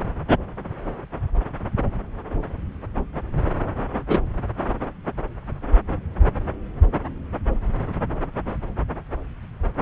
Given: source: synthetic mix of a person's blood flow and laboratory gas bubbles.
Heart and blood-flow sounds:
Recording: Doppler ultrasound of blood flow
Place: subclavian vein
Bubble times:
4.09-4.19 s: bubbles
From the record:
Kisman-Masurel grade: 113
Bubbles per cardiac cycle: 1 to 2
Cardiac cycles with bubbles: 1 to 10%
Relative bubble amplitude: loud (0.450 to 0.775)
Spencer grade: 1 (occasional bubble signal discernible with the cardiac motion signal, with majority of cardiac periods free of bubbles)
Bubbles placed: anywhere in the cardiac cycle

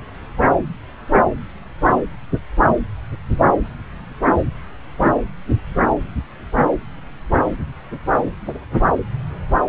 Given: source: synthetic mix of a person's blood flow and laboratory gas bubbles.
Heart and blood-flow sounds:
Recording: Doppler ultrasound of blood flow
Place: subclavian vein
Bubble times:
4.99-5.12 s: bubbles
8.45-8.52 s: bubbles
From the record:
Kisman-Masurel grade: 121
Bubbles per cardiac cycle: 1 to 2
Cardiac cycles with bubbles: 10 to 50%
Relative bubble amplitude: barely perceptible (0.100 to 0.250)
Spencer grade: 2 (many but less than half of the cardiac periods contain bubble signals, singularly or in groups)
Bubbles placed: anywhere in the cardiac cycle

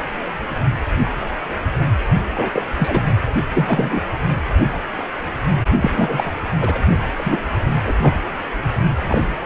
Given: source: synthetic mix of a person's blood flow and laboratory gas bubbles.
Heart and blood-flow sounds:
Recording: Doppler ultrasound of blood flow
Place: precordium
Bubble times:
2.35-2.50 s: bubbles
2.52-2.63 s: bubbles
2.78-3.02 s: bubbles
3.55-4.01 s: bubbles
5.81-6.32 s: bubbles
6.61-6.80 s: bubbles
7.18-7.39 s: bubbles
7.85-7.95 s: bubbles
8.01-8.20 s: bubbles
8.62-8.71 s: bubbles
9.10-9.21 s: bubbles
From the record:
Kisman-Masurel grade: 233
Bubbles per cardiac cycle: several, 3 to 8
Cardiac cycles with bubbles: 50 to 99%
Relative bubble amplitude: loud (0.450 to 0.775)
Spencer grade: 3 (all of the cardiac periods contain showers or single bubble signals, but not dominating or overriding the cardiac motion signals)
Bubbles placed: only in the low amplitude regions of the cardiac cycle

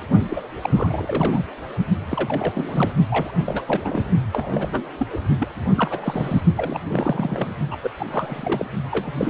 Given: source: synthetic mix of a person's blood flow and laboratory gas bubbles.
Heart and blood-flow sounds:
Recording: Doppler ultrasound of blood flow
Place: precordium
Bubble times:
0.29-0.41 s: bubbles
0.61-1.43 s: bubbles
2.06-2.92 s: bubbles
3.10-3.32 s: bubbles
3.46-3.62 s: bubbles
3.67-4.02 s: bubbles
4.33-4.92 s: bubbles
4.99-5.06 s: bubbles
5.12-5.17 s: bubbles
5.39-5.48 s: bubbles
5.75-6.42 s: bubbles
6.57-6.80 s: bubbles
6.88-7.50 s: bubbles
7.71-7.78 s: bubbles
7.82-7.89 s: bubbles
7.99-8.05 s: bubbles
8.11-8.65 s: bubbles
8.91-9.12 s: bubbles
9.17-9.29 s: bubbles
From the record:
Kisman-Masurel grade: 342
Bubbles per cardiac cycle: rolling drumbeat, 9 or more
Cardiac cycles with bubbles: 100%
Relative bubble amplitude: moderate (0.250 to 0.450)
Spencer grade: 3 (all of the cardiac periods contain showers or single bubble signals, but not dominating or overriding the cardiac motion signals)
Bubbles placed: only in the low amplitude regions of the cardiac cycle

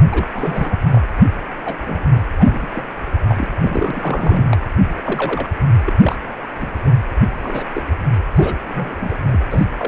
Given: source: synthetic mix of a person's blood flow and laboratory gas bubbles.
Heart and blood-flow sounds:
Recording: Doppler ultrasound of blood flow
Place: precordium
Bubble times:
0.07-0.30 s: bubbles
0.33-0.78 s: bubbles
0.91-1.01 s: bubbles
1.65-1.76 s: bubbles
1.86-2.04 s: bubbles
2.14-2.23 s: bubbles
2.39-2.68 s: bubbles
2.73-2.88 s: bubbles
3.29-3.48 s: bubbles
3.56-4.46 s: bubbles
4.51-4.58 s: bubbles
4.96-5.01 s: bubbles
5.04-5.48 s: bubbles
5.84-5.93 s: bubbles
5.98-6.16 s: bubbles
6.60-6.68 s: bubbles
6.84-6.92 s: bubbles
7.43-7.64 s: bubbles
7.74-7.84 s: bubbles
8.36-8.58 s: bubbles
8.64-9.14 s: bubbles
9.30-9.40 s: bubbles
9.50-9.65 s: bubbles
9.78-9.88 s: bubbles
From the record:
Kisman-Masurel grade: 242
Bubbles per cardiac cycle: several, 3 to 8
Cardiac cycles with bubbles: 100%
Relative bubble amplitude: moderate (0.250 to 0.450)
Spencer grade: 3 (all of the cardiac periods contain showers or single bubble signals, but not dominating or overriding the cardiac motion signals)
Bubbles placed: anywhere in the cardiac cycle

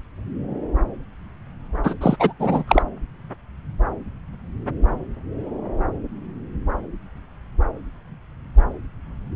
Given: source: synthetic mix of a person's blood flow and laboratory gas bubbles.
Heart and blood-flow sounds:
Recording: Doppler ultrasound of blood flow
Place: subclavian vein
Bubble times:
1.83-1.94 s: bubbles
2.00-2.17 s: bubbles
2.19-2.33 s: bubbles
2.39-2.63 s: bubbles
2.67-2.82 s: bubbles
From the record:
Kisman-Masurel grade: 213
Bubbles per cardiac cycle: several, 3 to 8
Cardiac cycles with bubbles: 1 to 10%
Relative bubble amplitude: loud (0.450 to 0.775)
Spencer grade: 1 (occasional bubble signal discernible with the cardiac motion signal, with majority of cardiac periods free of bubbles)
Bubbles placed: anywhere in the cardiac cycle

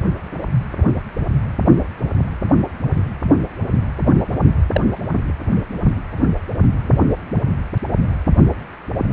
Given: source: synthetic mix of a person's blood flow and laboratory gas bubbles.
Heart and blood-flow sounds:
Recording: Doppler ultrasound of blood flow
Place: precordium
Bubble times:
4.73-4.81 s: bubbles
From the record:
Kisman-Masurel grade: 112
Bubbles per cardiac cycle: 1 to 2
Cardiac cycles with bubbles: 1 to 10%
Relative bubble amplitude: moderate (0.250 to 0.450)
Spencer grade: 1 (occasional bubble signal discernible with the cardiac motion signal, with majority of cardiac periods free of bubbles)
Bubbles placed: only in the low amplitude regions of the cardiac cycle

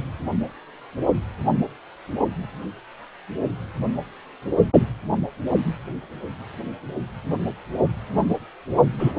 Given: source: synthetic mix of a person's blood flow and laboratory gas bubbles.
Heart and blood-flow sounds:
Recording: Doppler ultrasound of blood flow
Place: precordium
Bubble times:
8.98-9.13 s: bubbles
From the record:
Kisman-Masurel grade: 113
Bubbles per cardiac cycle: 1 to 2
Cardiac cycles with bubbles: 1 to 10%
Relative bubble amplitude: loud (0.450 to 0.775)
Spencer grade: 1 (occasional bubble signal discernible with the cardiac motion signal, with majority of cardiac periods free of bubbles)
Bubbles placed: only in the low amplitude regions of the cardiac cycle

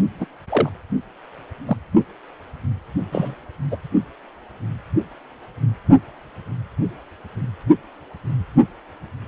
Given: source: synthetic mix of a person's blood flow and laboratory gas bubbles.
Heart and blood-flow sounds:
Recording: Doppler ultrasound of blood flow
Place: precordium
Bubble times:
0.20-0.25 s: bubbles
0.49-0.69 s: bubbles
1.67-1.77 s: bubbles
3.12-3.36 s: bubbles
3.71-3.77 s: bubbles
From the record:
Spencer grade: 2 (many but less than half of the cardiac periods contain bubble signals, singularly or in groups)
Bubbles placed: only in the low amplitude regions of the cardiac cycle

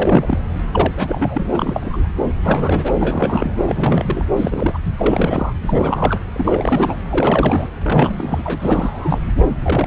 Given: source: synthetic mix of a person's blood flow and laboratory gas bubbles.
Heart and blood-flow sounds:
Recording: Doppler ultrasound of blood flow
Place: subclavian vein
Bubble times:
0.00-0.38 s: bubbles
0.73-0.93 s: bubbles
0.97-1.48 s: bubbles
1.53-2.08 s: bubbles
2.30-2.93 s: bubbles
3.00-3.56 s: bubbles
3.62-4.25 s: bubbles
4.37-4.78 s: bubbles
4.99-5.53 s: bubbles
5.62-6.20 s: bubbles
6.33-6.96 s: bubbles
7.09-7.68 s: bubbles
7.83-9.20 s: bubbles
9.62-9.87 s: bubbles
From the record:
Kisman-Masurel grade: 342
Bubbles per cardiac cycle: rolling drumbeat, 9 or more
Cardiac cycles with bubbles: 100%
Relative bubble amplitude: moderate (0.250 to 0.450)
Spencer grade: 3 (all of the cardiac periods contain showers or single bubble signals, but not dominating or overriding the cardiac motion signals)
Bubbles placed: anywhere in the cardiac cycle

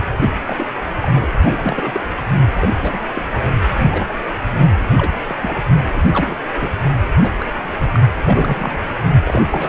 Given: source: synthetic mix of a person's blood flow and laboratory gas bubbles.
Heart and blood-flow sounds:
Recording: Doppler ultrasound of blood flow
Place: precordium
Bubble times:
0.46-0.67 s: bubbles
1.01-1.32 s: bubbles
1.45-2.01 s: bubbles
2.17-2.21 s: bubbles
2.60-2.74 s: bubbles
2.81-3.04 s: bubbles
3.15-3.26 s: bubbles
3.83-4.12 s: bubbles
4.55-4.68 s: bubbles
4.97-5.12 s: bubbles
5.28-5.36 s: bubbles
5.42-5.55 s: bubbles
5.96-6.02 s: bubbles
6.13-6.35 s: bubbles
6.61-6.67 s: bubbles
7.22-7.59 s: bubbles
7.81-7.87 s: bubbles
7.92-8.00 s: bubbles
8.25-8.79 s: bubbles
9.25-9.46 s: bubbles
9.52-9.69 s: bubbles
From the record:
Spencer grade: 3 (all of the cardiac periods contain showers or single bubble signals, but not dominating or overriding the cardiac motion signals)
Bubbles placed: anywhere in the cardiac cycle

